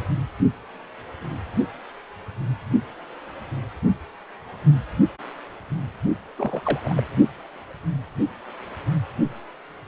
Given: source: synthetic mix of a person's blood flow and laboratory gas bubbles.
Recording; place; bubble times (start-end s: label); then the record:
Doppler ultrasound of blood flow; precordium
6.38-6.62 s: bubbles
6.65-6.80 s: bubbles
6.84-6.94 s: bubbles
6.96-7.03 s: bubbles
From the record:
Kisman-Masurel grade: 221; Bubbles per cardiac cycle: several, 3 to 8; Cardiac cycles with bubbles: 10 to 50%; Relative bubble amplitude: barely perceptible (0.100 to 0.250); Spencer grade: 2 (many but less than half of the cardiac periods contain bubble signals, singularly or in groups); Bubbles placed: only in the low amplitude regions of the cardiac cycle